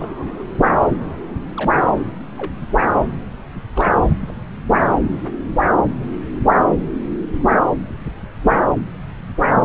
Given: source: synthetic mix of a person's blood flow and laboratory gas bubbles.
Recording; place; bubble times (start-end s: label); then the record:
Doppler ultrasound of blood flow; subclavian vein
0.00-0.44 s: bubbles
0.88-0.95 s: bubbles
1.56-1.73 s: bubbles
2.38-2.52 s: bubbles
2.57-2.67 s: bubbles
3.75-3.89 s: bubbles
4.20-4.32 s: bubbles
8.62-8.67 s: bubbles
From the record:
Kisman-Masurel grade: 121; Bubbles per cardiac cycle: 1 to 2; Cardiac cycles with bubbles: 10 to 50%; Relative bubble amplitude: barely perceptible (0.100 to 0.250); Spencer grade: 2 (many but less than half of the cardiac periods contain bubble signals, singularly or in groups); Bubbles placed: anywhere in the cardiac cycle